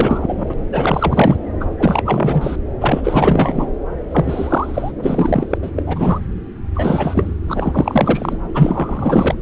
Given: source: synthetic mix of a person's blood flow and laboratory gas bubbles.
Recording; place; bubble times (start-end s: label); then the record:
Doppler ultrasound of blood flow; subclavian vein
0.00-0.53 s: bubbles
0.72-1.36 s: bubbles
1.60-1.65 s: bubbles
1.79-2.56 s: bubbles
2.81-3.71 s: bubbles
4.11-4.92 s: bubbles
5.02-5.45 s: bubbles
5.50-5.58 s: bubbles
5.62-5.71 s: bubbles
5.76-6.19 s: bubbles
6.75-7.34 s: bubbles
7.47-8.38 s: bubbles
8.54-9.34 s: bubbles
From the record:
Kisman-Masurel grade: 444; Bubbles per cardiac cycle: continuous sound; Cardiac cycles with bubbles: 100%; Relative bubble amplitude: maximal (0.775 to 0.999); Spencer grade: 4 (maximum detectable bubble signal sounding continuously throughout systole and diastole of every cardiac period, and overriding the amplitude of the normal cardiac signals); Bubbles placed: anywhere in the cardiac cycle